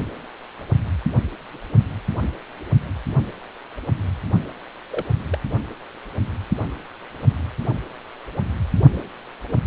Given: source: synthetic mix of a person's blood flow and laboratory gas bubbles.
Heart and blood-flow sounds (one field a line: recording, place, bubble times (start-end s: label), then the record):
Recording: Doppler ultrasound of blood flow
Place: precordium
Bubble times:
4.91-5.04 s: bubbles
5.29-5.38 s: bubbles
From the record:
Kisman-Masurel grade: 121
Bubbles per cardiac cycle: 1 to 2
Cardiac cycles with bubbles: 10 to 50%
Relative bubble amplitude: barely perceptible (0.100 to 0.250)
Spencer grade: 2 (many but less than half of the cardiac periods contain bubble signals, singularly or in groups)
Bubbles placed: only in the low amplitude regions of the cardiac cycle